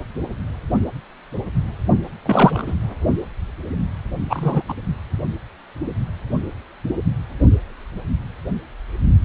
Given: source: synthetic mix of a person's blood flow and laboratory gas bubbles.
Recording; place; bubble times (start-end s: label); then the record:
Doppler ultrasound of blood flow; precordium
2.23-2.75 s: bubbles
4.29-4.62 s: bubbles
4.69-4.74 s: bubbles
From the record:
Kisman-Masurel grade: 223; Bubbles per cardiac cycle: several, 3 to 8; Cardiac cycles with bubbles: 10 to 50%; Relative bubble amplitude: loud (0.450 to 0.775); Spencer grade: 2 (many but less than half of the cardiac periods contain bubble signals, singularly or in groups); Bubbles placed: anywhere in the cardiac cycle